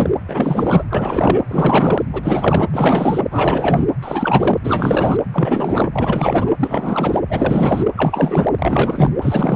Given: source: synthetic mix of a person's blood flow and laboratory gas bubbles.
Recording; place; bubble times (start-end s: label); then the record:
Doppler ultrasound of blood flow; precordium
0.00-0.11 s: bubbles
0.28-0.84 s: bubbles
0.90-1.42 s: bubbles
1.48-2.03 s: bubbles
2.12-2.69 s: bubbles
2.73-3.25 s: bubbles
3.31-3.87 s: bubbles
4.03-4.58 s: bubbles
4.63-5.17 s: bubbles
5.32-5.89 s: bubbles
5.93-6.53 s: bubbles
6.59-7.20 s: bubbles
7.29-7.85 s: bubbles
7.96-8.49 s: bubbles
8.59-9.15 s: bubbles
9.21-9.56 s: bubbles
From the record:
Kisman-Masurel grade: 444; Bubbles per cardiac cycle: continuous sound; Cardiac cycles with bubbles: 100%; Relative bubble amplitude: maximal (0.775 to 0.999); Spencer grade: 4 (maximum detectable bubble signal sounding continuously throughout systole and diastole of every cardiac period, and overriding the amplitude of the normal cardiac signals); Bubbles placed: anywhere in the cardiac cycle